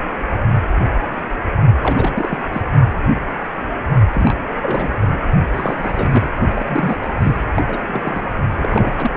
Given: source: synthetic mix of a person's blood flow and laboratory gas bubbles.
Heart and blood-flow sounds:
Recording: Doppler ultrasound of blood flow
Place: precordium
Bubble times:
1.81-2.38 s: bubbles
2.52-2.62 s: bubbles
4.12-4.39 s: bubbles
4.62-4.94 s: bubbles
5.00-5.19 s: bubbles
5.54-6.31 s: bubbles
6.55-6.97 s: bubbles
7.01-7.37 s: bubbles
7.50-7.63 s: bubbles
7.67-7.78 s: bubbles
7.86-8.31 s: bubbles
8.58-9.11 s: bubbles
From the record:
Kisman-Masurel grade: 332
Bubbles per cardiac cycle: rolling drumbeat, 9 or more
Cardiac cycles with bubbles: 50 to 99%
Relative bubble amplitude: moderate (0.250 to 0.450)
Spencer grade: 3 (all of the cardiac periods contain showers or single bubble signals, but not dominating or overriding the cardiac motion signals)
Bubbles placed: only in the low amplitude regions of the cardiac cycle

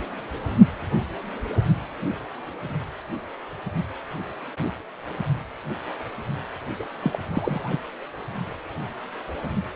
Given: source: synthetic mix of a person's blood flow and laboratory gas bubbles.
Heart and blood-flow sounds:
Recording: Doppler ultrasound of blood flow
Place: precordium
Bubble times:
6.79-6.86 s: bubbles
7.03-7.18 s: bubbles
7.32-7.78 s: bubbles
From the record:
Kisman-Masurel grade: 211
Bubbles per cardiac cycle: several, 3 to 8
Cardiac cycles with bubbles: 1 to 10%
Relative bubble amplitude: barely perceptible (0.100 to 0.250)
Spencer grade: 1 (occasional bubble signal discernible with the cardiac motion signal, with majority of cardiac periods free of bubbles)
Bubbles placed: only in the low amplitude regions of the cardiac cycle

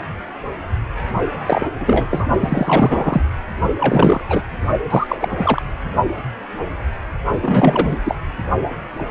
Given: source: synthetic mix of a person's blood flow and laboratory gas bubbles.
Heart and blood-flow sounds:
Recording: Doppler ultrasound of blood flow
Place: precordium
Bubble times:
1.46-1.67 s: bubbles
1.80-2.26 s: bubbles
2.40-3.22 s: bubbles
3.79-4.22 s: bubbles
4.29-4.43 s: bubbles
4.90-5.62 s: bubbles
7.42-7.97 s: bubbles
8.04-8.15 s: bubbles
From the record:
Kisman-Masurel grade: 333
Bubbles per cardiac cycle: rolling drumbeat, 9 or more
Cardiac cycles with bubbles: 50 to 99%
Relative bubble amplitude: loud (0.450 to 0.775)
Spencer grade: 3 (all of the cardiac periods contain showers or single bubble signals, but not dominating or overriding the cardiac motion signals)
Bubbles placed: only in the low amplitude regions of the cardiac cycle

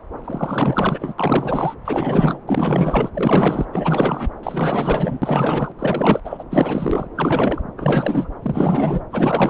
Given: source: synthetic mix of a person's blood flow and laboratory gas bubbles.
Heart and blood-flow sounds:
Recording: Doppler ultrasound of blood flow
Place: subclavian vein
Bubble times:
0.24-1.14 s: bubbles
1.18-1.75 s: bubbles
1.84-2.38 s: bubbles
2.48-3.10 s: bubbles
3.15-3.65 s: bubbles
3.72-4.29 s: bubbles
4.43-5.20 s: bubbles
5.22-5.72 s: bubbles
5.79-6.20 s: bubbles
6.25-6.44 s: bubbles
6.50-7.07 s: bubbles
7.15-7.62 s: bubbles
7.77-8.31 s: bubbles
8.42-9.02 s: bubbles
9.12-9.50 s: bubbles
From the record:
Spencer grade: 4 (maximum detectable bubble signal sounding continuously throughout systole and diastole of every cardiac period, and overriding the amplitude of the normal cardiac signals)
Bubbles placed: anywhere in the cardiac cycle

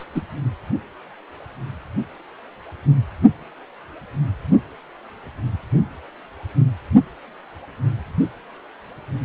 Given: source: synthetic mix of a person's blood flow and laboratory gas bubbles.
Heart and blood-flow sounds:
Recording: Doppler ultrasound of blood flow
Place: precordium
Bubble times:
0.00-0.04 s: bubbles
0.14-0.22 s: bubbles
From the record:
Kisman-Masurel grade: 222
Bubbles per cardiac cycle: several, 3 to 8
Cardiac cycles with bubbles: 10 to 50%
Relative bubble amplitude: moderate (0.250 to 0.450)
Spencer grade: 2 (many but less than half of the cardiac periods contain bubble signals, singularly or in groups)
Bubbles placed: anywhere in the cardiac cycle

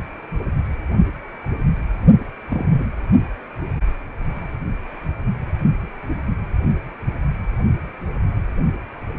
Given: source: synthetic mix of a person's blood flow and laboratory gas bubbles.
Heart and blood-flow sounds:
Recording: Doppler ultrasound of blood flow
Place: precordium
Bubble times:
2.48-2.86 s: bubbles
From the record:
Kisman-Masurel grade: 111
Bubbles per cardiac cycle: 1 to 2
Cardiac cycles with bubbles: 1 to 10%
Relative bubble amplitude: barely perceptible (0.100 to 0.250)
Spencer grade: 1 (occasional bubble signal discernible with the cardiac motion signal, with majority of cardiac periods free of bubbles)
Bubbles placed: only in the low amplitude regions of the cardiac cycle

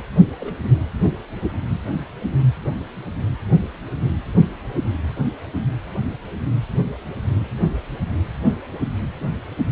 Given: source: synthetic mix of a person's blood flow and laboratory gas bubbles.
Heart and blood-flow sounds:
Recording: Doppler ultrasound of blood flow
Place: precordium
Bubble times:
0.40-0.53 s: bubbles
From the record:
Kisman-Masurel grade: 111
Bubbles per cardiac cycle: 1 to 2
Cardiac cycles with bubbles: 1 to 10%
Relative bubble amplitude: barely perceptible (0.100 to 0.250)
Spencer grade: 1 (occasional bubble signal discernible with the cardiac motion signal, with majority of cardiac periods free of bubbles)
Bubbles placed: anywhere in the cardiac cycle

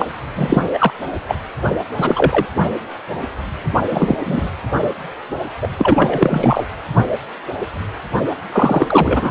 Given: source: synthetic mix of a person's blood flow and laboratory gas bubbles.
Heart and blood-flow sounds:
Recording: Doppler ultrasound of blood flow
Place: precordium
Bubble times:
0.00-0.05 s: bubbles
0.35-0.64 s: bubbles
0.72-0.93 s: bubbles
1.28-1.35 s: bubbles
1.98-2.46 s: bubbles
3.91-4.18 s: bubbles
4.25-4.50 s: bubbles
5.62-5.69 s: bubbles
5.79-6.67 s: bubbles
8.51-9.31 s: bubbles
From the record:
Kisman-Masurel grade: 233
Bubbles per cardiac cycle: several, 3 to 8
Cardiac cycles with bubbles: 50 to 99%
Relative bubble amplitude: loud (0.450 to 0.775)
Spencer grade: 3 (all of the cardiac periods contain showers or single bubble signals, but not dominating or overriding the cardiac motion signals)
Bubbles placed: only in the low amplitude regions of the cardiac cycle

